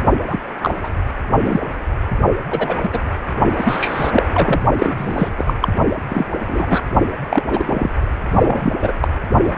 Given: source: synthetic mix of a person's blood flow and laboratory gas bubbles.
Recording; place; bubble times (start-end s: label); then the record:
Doppler ultrasound of blood flow; precordium
0.27-0.37 s: bubbles
0.61-0.74 s: bubbles
0.83-0.89 s: bubbles
1.44-1.60 s: bubbles
2.50-2.76 s: bubbles
2.82-2.90 s: bubbles
2.93-3.00 s: bubbles
3.58-4.24 s: bubbles
4.33-4.61 s: bubbles
4.79-5.32 s: bubbles
5.38-5.54 s: bubbles
5.61-5.68 s: bubbles
6.08-6.45 s: bubbles
6.47-6.80 s: bubbles
7.29-7.89 s: bubbles
8.32-8.73 s: bubbles
8.82-8.93 s: bubbles
9.02-9.07 s: bubbles
9.43-9.54 s: bubbles
From the record:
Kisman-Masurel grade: 243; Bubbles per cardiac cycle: several, 3 to 8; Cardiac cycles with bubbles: 100%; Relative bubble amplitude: loud (0.450 to 0.775); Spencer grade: 3 (all of the cardiac periods contain showers or single bubble signals, but not dominating or overriding the cardiac motion signals); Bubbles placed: only in the low amplitude regions of the cardiac cycle